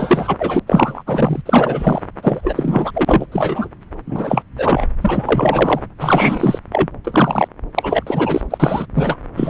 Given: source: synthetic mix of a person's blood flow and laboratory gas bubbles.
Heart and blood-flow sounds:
Doppler ultrasound of blood flow; subclavian vein
0.00-0.37 s: bubbles
0.40-0.59 s: bubbles
0.66-1.03 s: bubbles
1.06-1.41 s: bubbles
1.46-2.02 s: bubbles
2.23-2.91 s: bubbles
2.94-3.26 s: bubbles
3.31-3.69 s: bubbles
4.07-4.43 s: bubbles
4.58-4.86 s: bubbles
5.01-5.82 s: bubbles
6.00-6.58 s: bubbles
6.72-6.88 s: bubbles
7.04-7.48 s: bubbles
7.75-8.03 s: bubbles
8.06-8.42 s: bubbles
8.50-8.87 s: bubbles
8.95-9.17 s: bubbles
9.36-9.50 s: bubbles
From the record:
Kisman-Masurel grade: 343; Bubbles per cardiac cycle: rolling drumbeat, 9 or more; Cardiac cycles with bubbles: 100%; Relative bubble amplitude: loud (0.450 to 0.775); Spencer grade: 3 (all of the cardiac periods contain showers or single bubble signals, but not dominating or overriding the cardiac motion signals); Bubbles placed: anywhere in the cardiac cycle

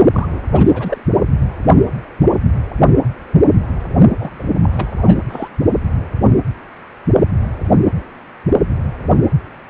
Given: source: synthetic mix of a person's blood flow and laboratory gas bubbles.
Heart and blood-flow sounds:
Doppler ultrasound of blood flow; precordium
0.13-0.43 s: bubbles
0.51-0.98 s: bubbles
4.19-4.31 s: bubbles
4.38-4.43 s: bubbles
4.62-5.19 s: bubbles
5.29-5.49 s: bubbles
From the record:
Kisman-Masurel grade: 232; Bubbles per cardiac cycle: several, 3 to 8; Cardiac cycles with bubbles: 50 to 99%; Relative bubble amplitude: moderate (0.250 to 0.450); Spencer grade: 3 (all of the cardiac periods contain showers or single bubble signals, but not dominating or overriding the cardiac motion signals); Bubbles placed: only in the low amplitude regions of the cardiac cycle

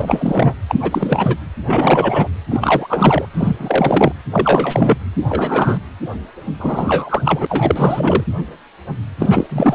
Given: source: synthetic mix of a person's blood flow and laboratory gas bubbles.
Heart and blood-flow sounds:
Doppler ultrasound of blood flow; precordium
0.00-0.55 s: bubbles
0.69-0.75 s: bubbles
0.82-1.38 s: bubbles
1.66-2.28 s: bubbles
2.50-3.26 s: bubbles
3.33-3.56 s: bubbles
3.59-4.12 s: bubbles
4.32-4.97 s: bubbles
5.29-5.78 s: bubbles
6.59-8.23 s: bubbles
9.19-9.75 s: bubbles
From the record:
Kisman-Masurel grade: 333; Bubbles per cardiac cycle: rolling drumbeat, 9 or more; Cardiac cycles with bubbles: 50 to 99%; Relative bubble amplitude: loud (0.450 to 0.775); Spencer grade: 3 (all of the cardiac periods contain showers or single bubble signals, but not dominating or overriding the cardiac motion signals); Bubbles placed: anywhere in the cardiac cycle

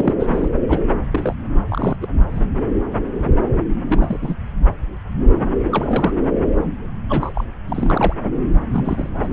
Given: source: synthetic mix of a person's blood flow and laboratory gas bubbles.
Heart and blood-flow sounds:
Doppler ultrasound of blood flow; subclavian vein
0.00-0.14 s: bubbles
0.19-0.48 s: bubbles
0.69-0.80 s: bubbles
1.10-1.34 s: bubbles
1.69-1.96 s: bubbles
2.00-2.08 s: bubbles
2.31-2.44 s: bubbles
3.86-4.36 s: bubbles
5.71-6.12 s: bubbles
7.09-7.32 s: bubbles
7.35-7.45 s: bubbles
7.67-8.13 s: bubbles
8.73-9.09 s: bubbles
9.23-9.28 s: bubbles
From the record:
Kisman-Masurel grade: 232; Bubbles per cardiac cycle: several, 3 to 8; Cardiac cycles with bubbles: 50 to 99%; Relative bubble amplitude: moderate (0.250 to 0.450); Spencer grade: 3 (all of the cardiac periods contain showers or single bubble signals, but not dominating or overriding the cardiac motion signals); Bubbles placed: anywhere in the cardiac cycle

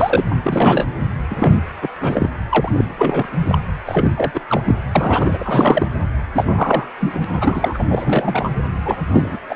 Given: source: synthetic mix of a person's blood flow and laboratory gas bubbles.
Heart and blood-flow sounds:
Doppler ultrasound of blood flow; precordium
0.00-0.25 s: bubbles
0.30-0.36 s: bubbles
0.42-0.86 s: bubbles
1.30-1.62 s: bubbles
1.81-1.88 s: bubbles
2.00-2.29 s: bubbles
2.49-2.85 s: bubbles
2.98-3.26 s: bubbles
3.44-3.58 s: bubbles
3.85-4.11 s: bubbles
4.17-4.31 s: bubbles
4.34-4.40 s: bubbles
4.49-4.61 s: bubbles
4.64-4.75 s: bubbles
4.95-5.38 s: bubbles
5.41-5.88 s: bubbles
6.34-6.87 s: bubbles
7.00-7.25 s: bubbles
7.32-7.85 s: bubbles
7.90-8.50 s: bubbles
8.85-8.96 s: bubbles
9.11-9.38 s: bubbles
9.49-9.55 s: bubbles
From the record:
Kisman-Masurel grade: 342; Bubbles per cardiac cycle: rolling drumbeat, 9 or more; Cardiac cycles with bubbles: 100%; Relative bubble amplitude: moderate (0.250 to 0.450); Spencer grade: 3 (all of the cardiac periods contain showers or single bubble signals, but not dominating or overriding the cardiac motion signals); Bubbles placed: anywhere in the cardiac cycle

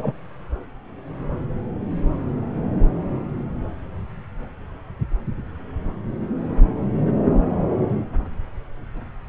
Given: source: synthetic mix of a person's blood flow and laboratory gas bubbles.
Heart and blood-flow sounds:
Doppler ultrasound of blood flow; subclavian vein
0.00-0.13 s: bubbles
From the record:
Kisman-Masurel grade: 113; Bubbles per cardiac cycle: 1 to 2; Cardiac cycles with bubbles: 1 to 10%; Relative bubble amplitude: loud (0.450 to 0.775); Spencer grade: 1 (occasional bubble signal discernible with the cardiac motion signal, with majority of cardiac periods free of bubbles); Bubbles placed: anywhere in the cardiac cycle

